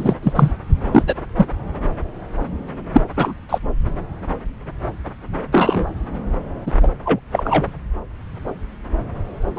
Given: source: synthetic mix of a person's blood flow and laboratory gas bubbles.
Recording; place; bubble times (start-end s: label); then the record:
Doppler ultrasound of blood flow; subclavian vein
0.00-0.15 s: bubbles
0.22-0.33 s: bubbles
0.35-0.51 s: bubbles
0.93-1.04 s: bubbles
1.06-1.14 s: bubbles
1.36-1.46 s: bubbles
2.92-3.01 s: bubbles
3.16-3.34 s: bubbles
3.49-3.58 s: bubbles
5.51-5.85 s: bubbles
6.66-6.71 s: bubbles
6.82-6.88 s: bubbles
7.04-7.19 s: bubbles
7.32-7.67 s: bubbles
9.55-9.59 s: bubbles
From the record:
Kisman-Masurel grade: 233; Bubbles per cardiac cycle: several, 3 to 8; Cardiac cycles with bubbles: 50 to 99%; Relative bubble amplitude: loud (0.450 to 0.775); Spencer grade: 3 (all of the cardiac periods contain showers or single bubble signals, but not dominating or overriding the cardiac motion signals); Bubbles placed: anywhere in the cardiac cycle